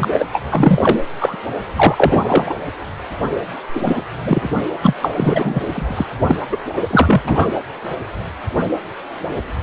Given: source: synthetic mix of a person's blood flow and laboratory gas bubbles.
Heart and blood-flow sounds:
Doppler ultrasound of blood flow; precordium
0.00-0.26 s: bubbles
0.32-0.42 s: bubbles
0.49-1.04 s: bubbles
1.19-1.35 s: bubbles
1.74-2.24 s: bubbles
2.28-2.44 s: bubbles
2.47-2.54 s: bubbles
3.75-4.03 s: bubbles
4.25-4.49 s: bubbles
4.83-4.93 s: bubbles
5.01-5.67 s: bubbles
5.72-6.07 s: bubbles
6.27-6.35 s: bubbles
6.51-6.57 s: bubbles
6.76-6.82 s: bubbles
6.90-7.21 s: bubbles
7.24-7.48 s: bubbles
From the record:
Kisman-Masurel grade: 333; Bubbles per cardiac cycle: rolling drumbeat, 9 or more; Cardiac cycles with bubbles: 50 to 99%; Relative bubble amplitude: loud (0.450 to 0.775); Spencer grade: 3 (all of the cardiac periods contain showers or single bubble signals, but not dominating or overriding the cardiac motion signals); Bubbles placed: anywhere in the cardiac cycle

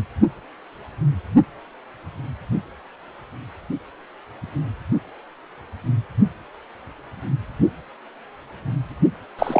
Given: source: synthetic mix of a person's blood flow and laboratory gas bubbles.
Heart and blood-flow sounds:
Doppler ultrasound of blood flow; precordium
9.38-9.60 s: bubbles
From the record:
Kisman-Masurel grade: 223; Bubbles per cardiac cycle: several, 3 to 8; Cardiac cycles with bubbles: 10 to 50%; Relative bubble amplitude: loud (0.450 to 0.775); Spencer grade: 2 (many but less than half of the cardiac periods contain bubble signals, singularly or in groups); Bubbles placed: only in the low amplitude regions of the cardiac cycle

